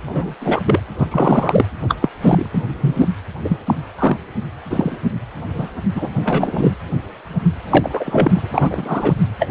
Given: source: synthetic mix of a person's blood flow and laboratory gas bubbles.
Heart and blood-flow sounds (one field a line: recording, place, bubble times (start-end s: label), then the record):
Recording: Doppler ultrasound of blood flow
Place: precordium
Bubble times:
0.06-0.35 s: bubbles
0.40-0.62 s: bubbles
0.66-0.80 s: bubbles
0.98-1.07 s: bubbles
1.11-1.66 s: bubbles
1.88-1.95 s: bubbles
2.02-2.09 s: bubbles
2.21-2.49 s: bubbles
2.54-2.63 s: bubbles
2.81-3.08 s: bubbles
3.44-3.58 s: bubbles
3.67-3.74 s: bubbles
3.99-4.17 s: bubbles
4.70-4.97 s: bubbles
5.58-5.68 s: bubbles
5.96-6.10 s: bubbles
6.15-6.77 s: bubbles
7.70-8.50 s: bubbles
8.54-9.14 s: bubbles
9.38-9.49 s: bubbles
From the record:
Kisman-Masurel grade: 233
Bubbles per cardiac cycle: several, 3 to 8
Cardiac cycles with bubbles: 50 to 99%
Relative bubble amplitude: loud (0.450 to 0.775)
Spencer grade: 3 (all of the cardiac periods contain showers or single bubble signals, but not dominating or overriding the cardiac motion signals)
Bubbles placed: anywhere in the cardiac cycle